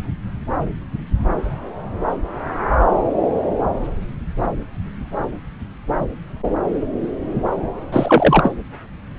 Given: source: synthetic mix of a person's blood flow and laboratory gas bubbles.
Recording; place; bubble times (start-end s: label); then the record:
Doppler ultrasound of blood flow; subclavian vein
7.92-8.53 s: bubbles
From the record:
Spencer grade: 1 (occasional bubble signal discernible with the cardiac motion signal, with majority of cardiac periods free of bubbles); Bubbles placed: anywhere in the cardiac cycle